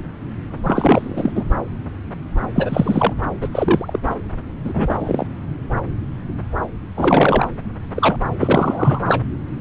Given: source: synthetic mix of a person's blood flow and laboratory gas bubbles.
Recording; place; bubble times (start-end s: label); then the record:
Doppler ultrasound of blood flow; subclavian vein
0.64-1.32 s: bubbles
1.35-1.45 s: bubbles
2.55-3.13 s: bubbles
3.41-3.48 s: bubbles
3.52-4.00 s: bubbles
4.05-4.15 s: bubbles
4.64-5.27 s: bubbles
6.96-7.48 s: bubbles
7.95-8.16 s: bubbles
8.40-8.99 s: bubbles
9.08-9.21 s: bubbles
From the record:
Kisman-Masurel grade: 233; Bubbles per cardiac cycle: several, 3 to 8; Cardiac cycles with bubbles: 50 to 99%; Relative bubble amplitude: loud (0.450 to 0.775); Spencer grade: 3 (all of the cardiac periods contain showers or single bubble signals, but not dominating or overriding the cardiac motion signals); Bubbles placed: anywhere in the cardiac cycle